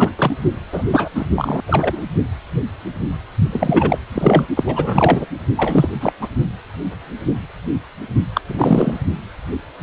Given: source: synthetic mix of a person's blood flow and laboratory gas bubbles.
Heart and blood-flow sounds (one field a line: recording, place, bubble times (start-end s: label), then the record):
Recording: Doppler ultrasound of blood flow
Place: precordium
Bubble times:
0.00-0.11 s: bubbles
0.17-0.36 s: bubbles
0.72-0.86 s: bubbles
0.91-1.09 s: bubbles
1.15-1.26 s: bubbles
1.35-1.62 s: bubbles
1.68-2.06 s: bubbles
3.51-3.98 s: bubbles
4.12-4.47 s: bubbles
4.56-5.26 s: bubbles
5.56-5.89 s: bubbles
5.94-6.12 s: bubbles
6.21-6.28 s: bubbles
8.34-8.41 s: bubbles
8.46-9.00 s: bubbles
From the record:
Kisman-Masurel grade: 333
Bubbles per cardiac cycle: rolling drumbeat, 9 or more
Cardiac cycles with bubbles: 50 to 99%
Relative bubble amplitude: loud (0.450 to 0.775)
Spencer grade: 3 (all of the cardiac periods contain showers or single bubble signals, but not dominating or overriding the cardiac motion signals)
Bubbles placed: only in the low amplitude regions of the cardiac cycle